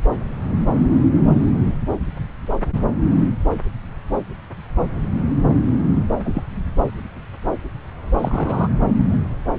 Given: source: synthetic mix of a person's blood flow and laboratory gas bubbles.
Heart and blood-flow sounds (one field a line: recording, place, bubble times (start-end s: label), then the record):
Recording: Doppler ultrasound of blood flow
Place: subclavian vein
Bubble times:
6.24-6.45 s: bubbles
8.18-8.68 s: bubbles
From the record:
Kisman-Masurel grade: 112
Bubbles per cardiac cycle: 1 to 2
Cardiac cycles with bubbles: 1 to 10%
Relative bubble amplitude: moderate (0.250 to 0.450)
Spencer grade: 1 (occasional bubble signal discernible with the cardiac motion signal, with majority of cardiac periods free of bubbles)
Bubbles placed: anywhere in the cardiac cycle